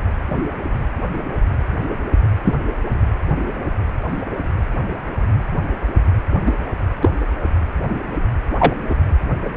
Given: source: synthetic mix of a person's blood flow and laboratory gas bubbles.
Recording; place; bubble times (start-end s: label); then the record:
Doppler ultrasound of blood flow; precordium
0.31-0.39 s: bubbles
2.44-2.54 s: bubbles
6.46-6.52 s: bubbles
7.01-7.09 s: bubbles
8.59-8.74 s: bubbles
8.89-8.95 s: bubbles
From the record:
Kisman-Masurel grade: 123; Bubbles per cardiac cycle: 1 to 2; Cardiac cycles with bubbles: 10 to 50%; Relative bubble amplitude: loud (0.450 to 0.775); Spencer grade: 2 (many but less than half of the cardiac periods contain bubble signals, singularly or in groups); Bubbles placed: anywhere in the cardiac cycle